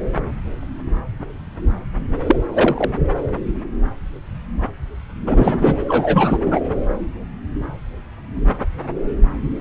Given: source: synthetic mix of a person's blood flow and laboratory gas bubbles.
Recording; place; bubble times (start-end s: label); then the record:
Doppler ultrasound of blood flow; subclavian vein
2.27-2.36 s: bubbles
2.53-2.90 s: bubbles
5.27-5.82 s: bubbles
5.87-6.39 s: bubbles
6.46-6.61 s: bubbles
From the record:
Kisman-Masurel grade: 223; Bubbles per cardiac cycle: several, 3 to 8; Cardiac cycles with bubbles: 10 to 50%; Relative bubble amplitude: loud (0.450 to 0.775); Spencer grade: 2 (many but less than half of the cardiac periods contain bubble signals, singularly or in groups); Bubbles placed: anywhere in the cardiac cycle